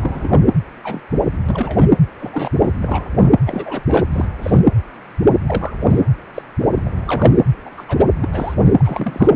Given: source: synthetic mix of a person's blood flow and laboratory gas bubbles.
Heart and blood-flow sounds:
Doppler ultrasound of blood flow; precordium
0.00-0.40 s: bubbles
0.83-1.01 s: bubbles
1.11-1.20 s: bubbles
1.48-1.89 s: bubbles
2.20-2.51 s: bubbles
2.59-2.70 s: bubbles
2.81-3.07 s: bubbles
3.12-3.30 s: bubbles
3.46-3.82 s: bubbles
3.88-4.07 s: bubbles
4.12-4.25 s: bubbles
4.42-4.61 s: bubbles
5.46-5.73 s: bubbles
5.80-6.02 s: bubbles
6.34-6.42 s: bubbles
6.60-6.68 s: bubbles
6.74-6.83 s: bubbles
6.86-6.90 s: bubbles
6.96-7.38 s: bubbles
7.66-7.70 s: bubbles
7.76-7.85 s: bubbles
7.88-8.06 s: bubbles
8.21-8.28 s: bubbles
8.33-8.54 s: bubbles
8.58-9.31 s: bubbles
From the record:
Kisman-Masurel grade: 232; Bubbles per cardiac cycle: several, 3 to 8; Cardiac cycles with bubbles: 50 to 99%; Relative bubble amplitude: moderate (0.250 to 0.450); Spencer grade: 3 (all of the cardiac periods contain showers or single bubble signals, but not dominating or overriding the cardiac motion signals); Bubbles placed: anywhere in the cardiac cycle

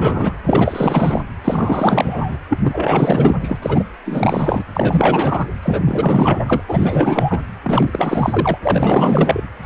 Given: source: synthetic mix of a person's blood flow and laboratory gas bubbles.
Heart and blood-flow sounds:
Doppler ultrasound of blood flow; precordium
0.00-0.36 s: bubbles
0.44-1.21 s: bubbles
1.44-2.38 s: bubbles
2.49-2.59 s: bubbles
2.63-3.36 s: bubbles
3.42-3.58 s: bubbles
3.62-3.83 s: bubbles
4.05-4.65 s: bubbles
4.74-5.47 s: bubbles
5.62-5.80 s: bubbles
5.84-6.62 s: bubbles
6.68-7.41 s: bubbles
7.63-8.57 s: bubbles
8.62-9.47 s: bubbles
9.62-9.66 s: bubbles
From the record:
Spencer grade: 4 (maximum detectable bubble signal sounding continuously throughout systole and diastole of every cardiac period, and overriding the amplitude of the normal cardiac signals); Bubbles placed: anywhere in the cardiac cycle

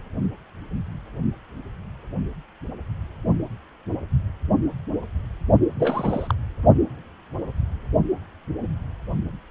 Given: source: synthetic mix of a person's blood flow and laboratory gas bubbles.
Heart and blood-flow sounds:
Doppler ultrasound of blood flow; precordium
5.75-6.34 s: bubbles
From the record:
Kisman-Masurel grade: 212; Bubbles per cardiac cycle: several, 3 to 8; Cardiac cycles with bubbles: 1 to 10%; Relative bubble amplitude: moderate (0.250 to 0.450); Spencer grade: 1 (occasional bubble signal discernible with the cardiac motion signal, with majority of cardiac periods free of bubbles); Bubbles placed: only in the low amplitude regions of the cardiac cycle

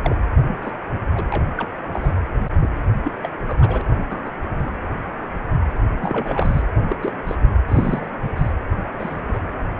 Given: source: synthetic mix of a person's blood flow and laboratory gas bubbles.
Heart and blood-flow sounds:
Doppler ultrasound of blood flow; precordium
0.02-0.16 s: bubbles
0.47-0.58 s: bubbles
0.61-0.71 s: bubbles
1.16-1.23 s: bubbles
1.32-1.47 s: bubbles
1.57-1.68 s: bubbles
1.93-2.12 s: bubbles
2.60-2.70 s: bubbles
3.04-3.12 s: bubbles
3.23-3.30 s: bubbles
3.47-3.82 s: bubbles
4.10-4.31 s: bubbles
4.54-4.71 s: bubbles
6.00-6.62 s: bubbles
6.89-6.96 s: bubbles
7.00-7.12 s: bubbles
7.27-7.35 s: bubbles
7.68-8.09 s: bubbles
8.23-8.29 s: bubbles
8.36-8.51 s: bubbles
8.97-9.40 s: bubbles
From the record:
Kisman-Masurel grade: 232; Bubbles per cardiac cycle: several, 3 to 8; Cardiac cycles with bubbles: 50 to 99%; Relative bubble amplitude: moderate (0.250 to 0.450); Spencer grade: 3 (all of the cardiac periods contain showers or single bubble signals, but not dominating or overriding the cardiac motion signals); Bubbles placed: anywhere in the cardiac cycle

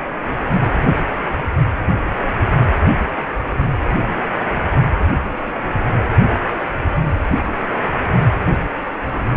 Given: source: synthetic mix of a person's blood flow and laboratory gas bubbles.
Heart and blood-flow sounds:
Doppler ultrasound of blood flow; precordium
no bubbles
From the record:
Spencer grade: 0 (complete lack of bubble signals)

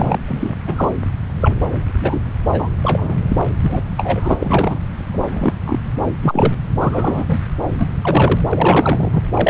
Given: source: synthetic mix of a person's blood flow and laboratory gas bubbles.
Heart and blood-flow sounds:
Doppler ultrasound of blood flow; subclavian vein
0.00-0.18 s: bubbles
0.27-0.55 s: bubbles
0.67-0.92 s: bubbles
1.25-1.84 s: bubbles
2.01-2.19 s: bubbles
2.53-2.70 s: bubbles
2.83-3.19 s: bubbles
3.28-3.37 s: bubbles
3.62-3.82 s: bubbles
3.98-4.34 s: bubbles
4.39-4.79 s: bubbles
5.11-5.54 s: bubbles
5.66-5.80 s: bubbles
6.23-6.54 s: bubbles
6.79-7.38 s: bubbles
7.79-7.86 s: bubbles
8.03-8.40 s: bubbles
8.51-9.21 s: bubbles
9.34-9.50 s: bubbles
From the record:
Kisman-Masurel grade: 243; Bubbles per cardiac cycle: several, 3 to 8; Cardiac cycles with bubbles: 100%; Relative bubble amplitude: loud (0.450 to 0.775); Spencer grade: 3 (all of the cardiac periods contain showers or single bubble signals, but not dominating or overriding the cardiac motion signals); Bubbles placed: anywhere in the cardiac cycle

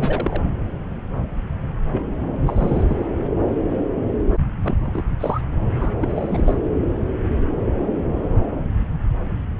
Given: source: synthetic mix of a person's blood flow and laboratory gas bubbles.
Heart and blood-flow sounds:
Doppler ultrasound of blood flow; subclavian vein
0.00-0.42 s: bubbles
1.91-2.04 s: bubbles
2.46-2.83 s: bubbles
2.88-3.08 s: bubbles
4.62-5.04 s: bubbles
5.20-5.41 s: bubbles
5.79-5.91 s: bubbles
6.01-6.57 s: bubbles
From the record:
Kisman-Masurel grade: 221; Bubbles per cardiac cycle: several, 3 to 8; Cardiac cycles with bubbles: 10 to 50%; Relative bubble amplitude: barely perceptible (0.100 to 0.250); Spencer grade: 2 (many but less than half of the cardiac periods contain bubble signals, singularly or in groups); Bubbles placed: anywhere in the cardiac cycle

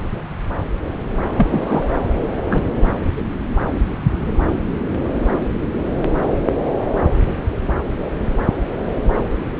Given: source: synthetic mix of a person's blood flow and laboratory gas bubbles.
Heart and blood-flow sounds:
Doppler ultrasound of blood flow; subclavian vein
1.36-1.47 s: bubbles
1.51-1.91 s: bubbles
2.50-2.64 s: bubbles
From the record:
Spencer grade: 2 (many but less than half of the cardiac periods contain bubble signals, singularly or in groups); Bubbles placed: anywhere in the cardiac cycle

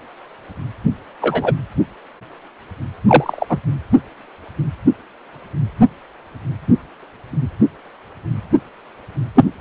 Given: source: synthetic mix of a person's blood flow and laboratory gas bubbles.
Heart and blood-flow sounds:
Doppler ultrasound of blood flow; precordium
1.21-1.53 s: bubbles
3.08-3.45 s: bubbles
3.49-3.58 s: bubbles
9.35-9.45 s: bubbles
From the record:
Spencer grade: 2 (many but less than half of the cardiac periods contain bubble signals, singularly or in groups); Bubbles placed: only in the low amplitude regions of the cardiac cycle

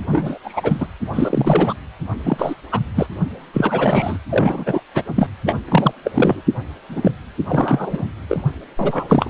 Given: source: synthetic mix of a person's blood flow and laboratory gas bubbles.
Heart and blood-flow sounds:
Doppler ultrasound of blood flow; precordium
0.07-0.38 s: bubbles
0.44-0.87 s: bubbles
1.13-1.73 s: bubbles
2.24-2.54 s: bubbles
2.71-2.80 s: bubbles
2.96-3.06 s: bubbles
3.53-4.18 s: bubbles
4.29-4.80 s: bubbles
4.95-5.03 s: bubbles
5.16-5.28 s: bubbles
5.46-5.58 s: bubbles
5.68-5.93 s: bubbles
6.03-6.11 s: bubbles
6.13-6.41 s: bubbles
6.89-7.12 s: bubbles
7.47-8.04 s: bubbles
8.29-8.43 s: bubbles
8.79-9.30 s: bubbles
From the record:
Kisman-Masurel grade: 343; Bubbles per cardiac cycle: rolling drumbeat, 9 or more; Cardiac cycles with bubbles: 100%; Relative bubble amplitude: loud (0.450 to 0.775); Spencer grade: 3 (all of the cardiac periods contain showers or single bubble signals, but not dominating or overriding the cardiac motion signals); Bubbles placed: anywhere in the cardiac cycle

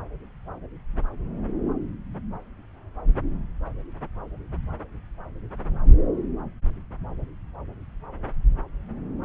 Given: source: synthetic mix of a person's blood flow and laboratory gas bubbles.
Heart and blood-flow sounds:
Doppler ultrasound of blood flow; subclavian vein
no bubbles
From the record:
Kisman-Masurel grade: 000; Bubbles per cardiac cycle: 0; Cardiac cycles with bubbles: 0%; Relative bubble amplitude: no bubbles discernible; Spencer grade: 0 (complete lack of bubble signals)

